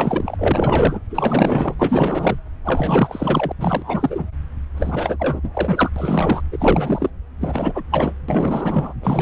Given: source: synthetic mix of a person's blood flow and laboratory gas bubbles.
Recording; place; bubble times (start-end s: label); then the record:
Doppler ultrasound of blood flow; subclavian vein
0.00-0.36 s: bubbles
0.38-1.00 s: bubbles
1.10-1.76 s: bubbles
1.78-2.39 s: bubbles
2.65-3.52 s: bubbles
3.58-4.26 s: bubbles
4.75-5.50 s: bubbles
5.54-5.90 s: bubbles
5.96-6.42 s: bubbles
6.51-7.09 s: bubbles
7.41-7.83 s: bubbles
7.91-8.14 s: bubbles
8.28-8.93 s: bubbles
9.03-9.22 s: bubbles
From the record:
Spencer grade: 4 (maximum detectable bubble signal sounding continuously throughout systole and diastole of every cardiac period, and overriding the amplitude of the normal cardiac signals); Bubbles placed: anywhere in the cardiac cycle